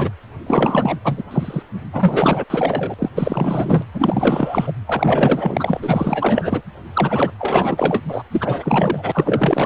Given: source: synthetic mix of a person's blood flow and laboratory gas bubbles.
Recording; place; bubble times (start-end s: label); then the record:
Doppler ultrasound of blood flow; precordium
0.00-0.12 s: bubbles
0.47-0.98 s: bubbles
1.04-1.23 s: bubbles
1.30-1.62 s: bubbles
1.92-2.44 s: bubbles
2.50-2.94 s: bubbles
2.99-3.09 s: bubbles
3.15-3.84 s: bubbles
3.94-4.73 s: bubbles
4.86-6.62 s: bubbles
6.94-7.31 s: bubbles
7.39-8.01 s: bubbles
8.07-8.24 s: bubbles
8.31-9.66 s: bubbles
From the record:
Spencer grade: 4 (maximum detectable bubble signal sounding continuously throughout systole and diastole of every cardiac period, and overriding the amplitude of the normal cardiac signals); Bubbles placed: anywhere in the cardiac cycle